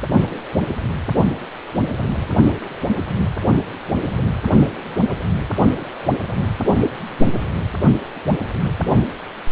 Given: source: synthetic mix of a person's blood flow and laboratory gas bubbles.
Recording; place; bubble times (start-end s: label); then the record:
Doppler ultrasound of blood flow; precordium
no bubbles
From the record:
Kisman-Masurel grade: 000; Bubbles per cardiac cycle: 0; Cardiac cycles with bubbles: 0%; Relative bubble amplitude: no bubbles discernible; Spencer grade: 0 (complete lack of bubble signals)